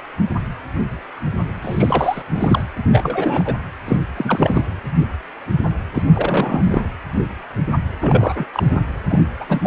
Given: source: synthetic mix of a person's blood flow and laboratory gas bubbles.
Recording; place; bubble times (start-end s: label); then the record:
Doppler ultrasound of blood flow; precordium
1.62-2.22 s: bubbles
2.34-2.64 s: bubbles
2.92-3.55 s: bubbles
3.84-3.98 s: bubbles
4.17-4.63 s: bubbles
5.95-6.03 s: bubbles
6.12-6.82 s: bubbles
8.01-8.46 s: bubbles
8.54-8.63 s: bubbles
9.08-9.19 s: bubbles
9.40-9.45 s: bubbles
9.47-9.67 s: bubbles
From the record:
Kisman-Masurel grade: 332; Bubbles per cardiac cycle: rolling drumbeat, 9 or more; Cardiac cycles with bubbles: 50 to 99%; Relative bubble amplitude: moderate (0.250 to 0.450); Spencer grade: 3 (all of the cardiac periods contain showers or single bubble signals, but not dominating or overriding the cardiac motion signals); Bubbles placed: anywhere in the cardiac cycle